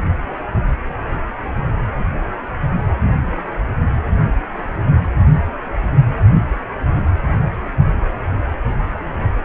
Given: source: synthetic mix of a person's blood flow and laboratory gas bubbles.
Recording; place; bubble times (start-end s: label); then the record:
Doppler ultrasound of blood flow; precordium
no bubbles
From the record:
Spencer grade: 0 (complete lack of bubble signals)